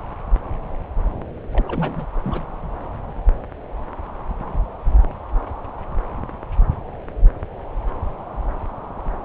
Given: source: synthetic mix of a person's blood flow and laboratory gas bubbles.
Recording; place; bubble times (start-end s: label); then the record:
Doppler ultrasound of blood flow; subclavian vein
1.53-2.06 s: bubbles
2.23-2.44 s: bubbles
From the record:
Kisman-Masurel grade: 211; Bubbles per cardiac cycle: several, 3 to 8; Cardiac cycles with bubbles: 1 to 10%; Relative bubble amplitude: barely perceptible (0.100 to 0.250); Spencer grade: 1 (occasional bubble signal discernible with the cardiac motion signal, with majority of cardiac periods free of bubbles); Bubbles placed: anywhere in the cardiac cycle